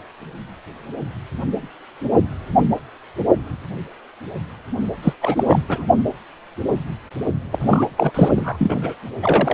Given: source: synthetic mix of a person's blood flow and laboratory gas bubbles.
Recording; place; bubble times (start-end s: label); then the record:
Doppler ultrasound of blood flow; precordium
5.02-5.13 s: bubbles
5.21-5.43 s: bubbles
5.47-5.59 s: bubbles
5.68-5.85 s: bubbles
7.51-7.58 s: bubbles
7.62-7.86 s: bubbles
7.96-8.11 s: bubbles
8.14-8.29 s: bubbles
8.36-8.94 s: bubbles
9.21-9.54 s: bubbles
From the record:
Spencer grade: 2 (many but less than half of the cardiac periods contain bubble signals, singularly or in groups); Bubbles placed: only in the low amplitude regions of the cardiac cycle